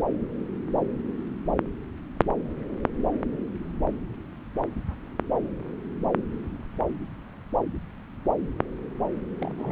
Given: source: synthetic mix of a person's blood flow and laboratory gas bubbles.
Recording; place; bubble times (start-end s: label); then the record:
Doppler ultrasound of blood flow; subclavian vein
9.40-9.54 s: bubbles
9.58-9.71 s: bubbles
From the record:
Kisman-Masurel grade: 211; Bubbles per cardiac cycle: several, 3 to 8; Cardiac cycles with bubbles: 1 to 10%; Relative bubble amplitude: barely perceptible (0.100 to 0.250); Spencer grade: 1 (occasional bubble signal discernible with the cardiac motion signal, with majority of cardiac periods free of bubbles); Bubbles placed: anywhere in the cardiac cycle